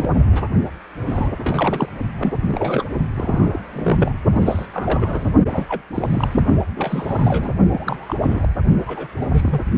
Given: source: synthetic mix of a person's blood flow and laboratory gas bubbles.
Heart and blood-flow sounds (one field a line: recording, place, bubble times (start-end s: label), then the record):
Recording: Doppler ultrasound of blood flow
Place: precordium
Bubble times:
0.00-0.09 s: bubbles
0.14-0.26 s: bubbles
0.32-0.47 s: bubbles
1.07-1.29 s: bubbles
1.39-1.89 s: bubbles
2.17-2.85 s: bubbles
3.14-3.62 s: bubbles
3.73-4.13 s: bubbles
4.33-4.67 s: bubbles
4.74-5.29 s: bubbles
5.50-5.82 s: bubbles
5.94-6.28 s: bubbles
6.31-6.41 s: bubbles
6.76-7.50 s: bubbles
7.71-8.15 s: bubbles
8.21-8.47 s: bubbles
8.86-9.07 s: bubbles
9.21-9.27 s: bubbles
9.31-9.60 s: bubbles
From the record:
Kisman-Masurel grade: 242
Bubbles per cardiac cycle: several, 3 to 8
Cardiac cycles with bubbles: 100%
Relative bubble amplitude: moderate (0.250 to 0.450)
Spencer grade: 3 (all of the cardiac periods contain showers or single bubble signals, but not dominating or overriding the cardiac motion signals)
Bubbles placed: only in the low amplitude regions of the cardiac cycle